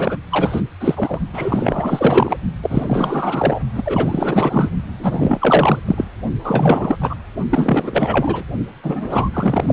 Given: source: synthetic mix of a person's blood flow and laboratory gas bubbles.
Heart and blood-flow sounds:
Doppler ultrasound of blood flow; precordium
0.00-0.17 s: bubbles
0.30-0.61 s: bubbles
0.79-1.20 s: bubbles
1.33-2.36 s: bubbles
2.63-3.60 s: bubbles
3.75-3.83 s: bubbles
3.85-4.69 s: bubbles
4.99-5.80 s: bubbles
5.87-6.05 s: bubbles
6.43-6.97 s: bubbles
7.01-7.16 s: bubbles
7.50-8.43 s: bubbles
8.83-9.29 s: bubbles
9.33-9.73 s: bubbles
From the record:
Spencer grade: 4 (maximum detectable bubble signal sounding continuously throughout systole and diastole of every cardiac period, and overriding the amplitude of the normal cardiac signals); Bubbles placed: only in the low amplitude regions of the cardiac cycle

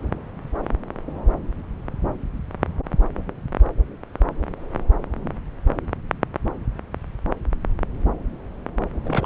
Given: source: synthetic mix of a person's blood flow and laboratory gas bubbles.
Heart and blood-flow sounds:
Doppler ultrasound of blood flow; subclavian vein
9.04-9.26 s: bubbles
From the record:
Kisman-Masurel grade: 111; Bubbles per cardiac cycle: 1 to 2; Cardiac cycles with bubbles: 1 to 10%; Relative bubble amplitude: barely perceptible (0.100 to 0.250); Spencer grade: 1 (occasional bubble signal discernible with the cardiac motion signal, with majority of cardiac periods free of bubbles); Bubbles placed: anywhere in the cardiac cycle

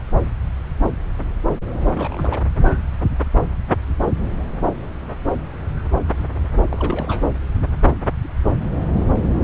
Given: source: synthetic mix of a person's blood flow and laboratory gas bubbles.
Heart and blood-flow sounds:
Doppler ultrasound of blood flow; subclavian vein
1.94-2.42 s: bubbles
6.69-7.23 s: bubbles
From the record:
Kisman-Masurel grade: 221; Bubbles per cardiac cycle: several, 3 to 8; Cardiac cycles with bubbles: 10 to 50%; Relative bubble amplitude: barely perceptible (0.100 to 0.250); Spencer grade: 2 (many but less than half of the cardiac periods contain bubble signals, singularly or in groups); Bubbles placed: anywhere in the cardiac cycle

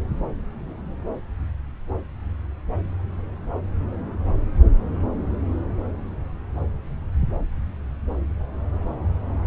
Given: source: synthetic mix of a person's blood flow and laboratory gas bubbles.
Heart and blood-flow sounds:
Doppler ultrasound of blood flow; subclavian vein
no bubbles
From the record:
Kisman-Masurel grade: 000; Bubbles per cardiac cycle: 0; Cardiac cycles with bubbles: 0%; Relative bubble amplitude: no bubbles discernible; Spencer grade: 0 (complete lack of bubble signals)

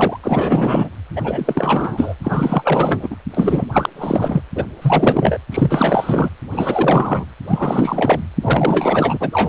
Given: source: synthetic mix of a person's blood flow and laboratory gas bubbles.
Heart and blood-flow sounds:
Doppler ultrasound of blood flow; precordium
0.00-0.18 s: bubbles
0.23-0.90 s: bubbles
1.15-2.15 s: bubbles
2.23-3.17 s: bubbles
3.33-3.67 s: bubbles
3.72-3.90 s: bubbles
3.96-4.42 s: bubbles
4.55-4.63 s: bubbles
4.82-5.38 s: bubbles
5.51-6.29 s: bubbles
6.52-7.27 s: bubbles
7.47-8.27 s: bubbles
8.41-9.17 s: bubbles
9.20-9.49 s: bubbles
From the record:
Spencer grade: 4 (maximum detectable bubble signal sounding continuously throughout systole and diastole of every cardiac period, and overriding the amplitude of the normal cardiac signals); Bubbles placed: anywhere in the cardiac cycle

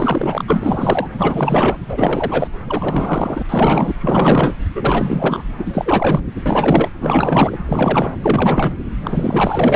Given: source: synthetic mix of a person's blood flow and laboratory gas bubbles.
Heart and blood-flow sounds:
Doppler ultrasound of blood flow; subclavian vein
0.00-0.44 s: bubbles
0.47-1.07 s: bubbles
1.18-1.78 s: bubbles
1.88-2.48 s: bubbles
2.68-3.42 s: bubbles
3.49-3.95 s: bubbles
4.00-4.53 s: bubbles
4.75-5.43 s: bubbles
5.57-6.21 s: bubbles
6.46-6.89 s: bubbles
6.99-7.58 s: bubbles
7.67-8.16 s: bubbles
8.22-8.76 s: bubbles
9.03-9.76 s: bubbles
From the record:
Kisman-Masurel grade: 444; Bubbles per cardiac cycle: continuous sound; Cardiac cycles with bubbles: 100%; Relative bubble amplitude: maximal (0.775 to 0.999); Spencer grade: 4 (maximum detectable bubble signal sounding continuously throughout systole and diastole of every cardiac period, and overriding the amplitude of the normal cardiac signals); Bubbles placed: anywhere in the cardiac cycle

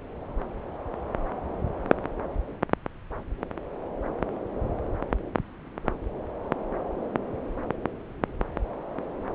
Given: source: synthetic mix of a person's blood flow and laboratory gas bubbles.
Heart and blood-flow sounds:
Doppler ultrasound of blood flow; subclavian vein
no bubbles
From the record:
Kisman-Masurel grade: 000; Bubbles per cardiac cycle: 0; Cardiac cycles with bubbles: 0%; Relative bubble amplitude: no bubbles discernible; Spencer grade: 0 (complete lack of bubble signals)

